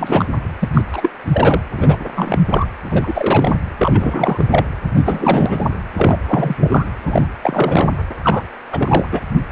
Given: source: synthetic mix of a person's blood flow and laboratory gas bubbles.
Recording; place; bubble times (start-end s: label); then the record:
Doppler ultrasound of blood flow; precordium
0.00-0.28 s: bubbles
0.60-0.68 s: bubbles
0.73-0.82 s: bubbles
0.92-1.10 s: bubbles
1.32-1.62 s: bubbles
1.77-1.97 s: bubbles
1.99-2.09 s: bubbles
2.15-2.42 s: bubbles
2.50-2.67 s: bubbles
2.83-3.58 s: bubbles
3.77-4.46 s: bubbles
4.50-4.65 s: bubbles
4.96-5.03 s: bubbles
5.05-5.66 s: bubbles
5.97-6.17 s: bubbles
6.27-6.56 s: bubbles
6.58-6.87 s: bubbles
7.05-7.27 s: bubbles
7.42-7.90 s: bubbles
8.22-8.44 s: bubbles
8.71-9.05 s: bubbles
9.11-9.21 s: bubbles
9.49-9.52 s: bubbles
From the record:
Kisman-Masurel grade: 343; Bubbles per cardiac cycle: rolling drumbeat, 9 or more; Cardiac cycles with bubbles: 100%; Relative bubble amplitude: loud (0.450 to 0.775); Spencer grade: 3 (all of the cardiac periods contain showers or single bubble signals, but not dominating or overriding the cardiac motion signals); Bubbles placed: anywhere in the cardiac cycle